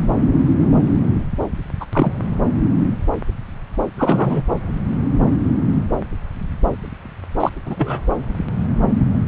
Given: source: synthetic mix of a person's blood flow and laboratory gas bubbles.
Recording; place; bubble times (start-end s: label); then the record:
Doppler ultrasound of blood flow; subclavian vein
0.00-0.02 s: bubbles
1.80-1.85 s: bubbles
1.92-2.12 s: bubbles
3.98-4.43 s: bubbles
7.39-7.50 s: bubbles
7.65-8.01 s: bubbles
From the record:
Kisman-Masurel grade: 223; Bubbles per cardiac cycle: several, 3 to 8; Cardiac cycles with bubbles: 10 to 50%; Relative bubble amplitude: loud (0.450 to 0.775); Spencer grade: 2 (many but less than half of the cardiac periods contain bubble signals, singularly or in groups); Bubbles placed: anywhere in the cardiac cycle